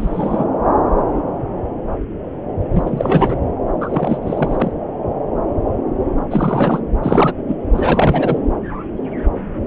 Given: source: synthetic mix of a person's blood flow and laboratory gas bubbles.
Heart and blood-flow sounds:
Doppler ultrasound of blood flow; subclavian vein
0.00-0.45 s: bubbles
2.73-3.36 s: bubbles
3.80-4.71 s: bubbles
6.30-6.80 s: bubbles
7.03-7.33 s: bubbles
7.47-7.55 s: bubbles
7.74-8.38 s: bubbles
From the record:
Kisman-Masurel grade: 333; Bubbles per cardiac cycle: rolling drumbeat, 9 or more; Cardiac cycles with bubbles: 50 to 99%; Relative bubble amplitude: loud (0.450 to 0.775); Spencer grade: 3 (all of the cardiac periods contain showers or single bubble signals, but not dominating or overriding the cardiac motion signals); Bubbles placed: anywhere in the cardiac cycle

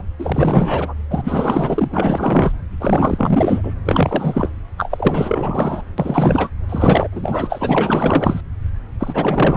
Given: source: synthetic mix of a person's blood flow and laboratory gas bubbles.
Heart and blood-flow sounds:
Doppler ultrasound of blood flow; subclavian vein
0.00-0.02 s: bubbles
0.18-0.94 s: bubbles
1.10-1.87 s: bubbles
1.92-2.52 s: bubbles
2.80-3.73 s: bubbles
3.80-3.82 s: bubbles
3.85-4.49 s: bubbles
4.77-5.82 s: bubbles
5.98-6.51 s: bubbles
6.69-7.08 s: bubbles
7.12-8.41 s: bubbles
8.99-9.57 s: bubbles
From the record:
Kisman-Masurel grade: 444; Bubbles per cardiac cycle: continuous sound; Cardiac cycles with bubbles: 100%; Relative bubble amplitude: maximal (0.775 to 0.999); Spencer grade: 4 (maximum detectable bubble signal sounding continuously throughout systole and diastole of every cardiac period, and overriding the amplitude of the normal cardiac signals); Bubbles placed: anywhere in the cardiac cycle

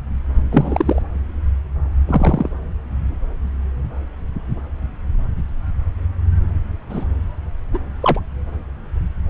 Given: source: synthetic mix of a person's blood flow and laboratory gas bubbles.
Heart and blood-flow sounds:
Doppler ultrasound of blood flow; subclavian vein
0.51-1.02 s: bubbles
2.07-2.50 s: bubbles
6.89-7.05 s: bubbles
7.74-7.78 s: bubbles
8.02-8.20 s: bubbles
From the record:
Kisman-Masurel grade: 123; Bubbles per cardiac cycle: 1 to 2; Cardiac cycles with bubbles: 10 to 50%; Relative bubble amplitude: loud (0.450 to 0.775); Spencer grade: 2 (many but less than half of the cardiac periods contain bubble signals, singularly or in groups); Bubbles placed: anywhere in the cardiac cycle

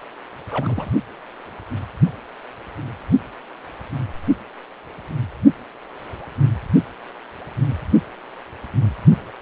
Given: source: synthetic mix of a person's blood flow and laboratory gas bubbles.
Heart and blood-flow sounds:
Doppler ultrasound of blood flow; precordium
0.51-0.91 s: bubbles
From the record:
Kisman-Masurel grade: 211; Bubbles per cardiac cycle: several, 3 to 8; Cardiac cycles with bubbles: 1 to 10%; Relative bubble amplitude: barely perceptible (0.100 to 0.250); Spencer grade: 1 (occasional bubble signal discernible with the cardiac motion signal, with majority of cardiac periods free of bubbles); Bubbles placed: only in the low amplitude regions of the cardiac cycle

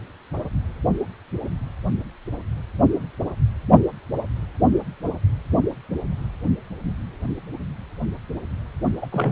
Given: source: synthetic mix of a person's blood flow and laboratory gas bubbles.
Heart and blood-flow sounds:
Doppler ultrasound of blood flow; precordium
9.01-9.06 s: bubbles
9.11-9.32 s: bubbles
From the record:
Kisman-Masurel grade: 212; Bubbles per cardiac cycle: several, 3 to 8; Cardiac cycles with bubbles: 1 to 10%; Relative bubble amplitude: moderate (0.250 to 0.450); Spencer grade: 1 (occasional bubble signal discernible with the cardiac motion signal, with majority of cardiac periods free of bubbles); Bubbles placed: only in the low amplitude regions of the cardiac cycle

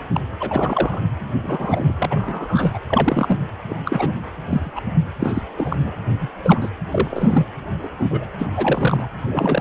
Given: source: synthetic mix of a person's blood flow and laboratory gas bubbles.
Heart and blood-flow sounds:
Doppler ultrasound of blood flow; precordium
0.12-0.20 s: bubbles
0.40-1.00 s: bubbles
1.42-1.94 s: bubbles
1.98-2.78 s: bubbles
2.88-3.36 s: bubbles
3.62-3.79 s: bubbles
3.85-4.10 s: bubbles
4.47-4.81 s: bubbles
5.20-5.42 s: bubbles
5.58-5.92 s: bubbles
6.21-6.29 s: bubbles
6.43-6.70 s: bubbles
6.91-7.45 s: bubbles
7.83-7.89 s: bubbles
7.99-8.25 s: bubbles
8.40-8.47 s: bubbles
8.53-9.08 s: bubbles
9.29-9.61 s: bubbles
From the record:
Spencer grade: 3 (all of the cardiac periods contain showers or single bubble signals, but not dominating or overriding the cardiac motion signals); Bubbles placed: anywhere in the cardiac cycle

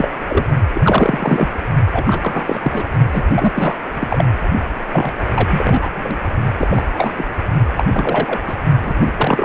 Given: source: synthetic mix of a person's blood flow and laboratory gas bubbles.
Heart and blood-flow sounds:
Doppler ultrasound of blood flow; precordium
0.00-0.08 s: bubbles
0.28-0.45 s: bubbles
0.72-1.48 s: bubbles
1.93-2.84 s: bubbles
3.12-3.24 s: bubbles
3.33-3.51 s: bubbles
3.54-3.75 s: bubbles
3.94-4.25 s: bubbles
4.92-5.12 s: bubbles
5.36-5.88 s: bubbles
5.96-6.16 s: bubbles
6.59-6.86 s: bubbles
6.98-7.12 s: bubbles
7.17-7.25 s: bubbles
7.76-7.85 s: bubbles
7.93-8.39 s: bubbles
8.46-8.57 s: bubbles
8.83-8.95 s: bubbles
9.01-9.12 s: bubbles
9.17-9.45 s: bubbles
From the record:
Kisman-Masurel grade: 343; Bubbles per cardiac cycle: rolling drumbeat, 9 or more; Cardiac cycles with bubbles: 100%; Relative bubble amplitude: loud (0.450 to 0.775); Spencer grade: 3 (all of the cardiac periods contain showers or single bubble signals, but not dominating or overriding the cardiac motion signals); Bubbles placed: only in the low amplitude regions of the cardiac cycle

